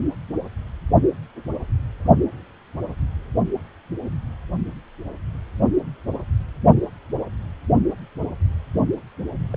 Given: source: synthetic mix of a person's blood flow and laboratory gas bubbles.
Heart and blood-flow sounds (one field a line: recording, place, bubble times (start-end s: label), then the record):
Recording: Doppler ultrasound of blood flow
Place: precordium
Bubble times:
9.54-9.56 s: bubbles
From the record:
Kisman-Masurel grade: 111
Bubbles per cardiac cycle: 1 to 2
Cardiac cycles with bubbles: 1 to 10%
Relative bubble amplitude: barely perceptible (0.100 to 0.250)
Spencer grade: 1 (occasional bubble signal discernible with the cardiac motion signal, with majority of cardiac periods free of bubbles)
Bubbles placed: only in the low amplitude regions of the cardiac cycle